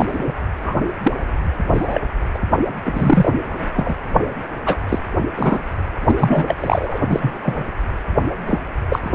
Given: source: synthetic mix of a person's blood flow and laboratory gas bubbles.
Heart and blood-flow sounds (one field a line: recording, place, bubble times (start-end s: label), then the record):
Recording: Doppler ultrasound of blood flow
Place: precordium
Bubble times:
0.00-0.06 s: bubbles
0.08-0.34 s: bubbles
0.64-0.75 s: bubbles
1.03-1.12 s: bubbles
1.73-2.01 s: bubbles
2.33-2.39 s: bubbles
2.85-3.31 s: bubbles
3.74-3.96 s: bubbles
4.66-4.77 s: bubbles
4.89-4.99 s: bubbles
5.31-5.64 s: bubbles
6.07-6.55 s: bubbles
6.60-6.98 s: bubbles
7.08-7.39 s: bubbles
7.42-7.65 s: bubbles
8.46-8.61 s: bubbles
8.88-9.00 s: bubbles
9.03-9.08 s: bubbles
From the record:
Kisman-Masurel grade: 243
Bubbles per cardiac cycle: several, 3 to 8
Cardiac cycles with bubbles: 100%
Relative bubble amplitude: loud (0.450 to 0.775)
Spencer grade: 3 (all of the cardiac periods contain showers or single bubble signals, but not dominating or overriding the cardiac motion signals)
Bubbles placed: anywhere in the cardiac cycle